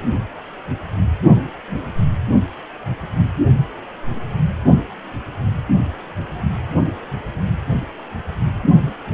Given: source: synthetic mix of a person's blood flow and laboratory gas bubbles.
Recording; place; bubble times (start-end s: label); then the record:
Doppler ultrasound of blood flow; precordium
no bubbles
From the record:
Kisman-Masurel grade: 000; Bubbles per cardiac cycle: 0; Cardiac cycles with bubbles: 0%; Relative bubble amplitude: no bubbles discernible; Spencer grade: 0 (complete lack of bubble signals)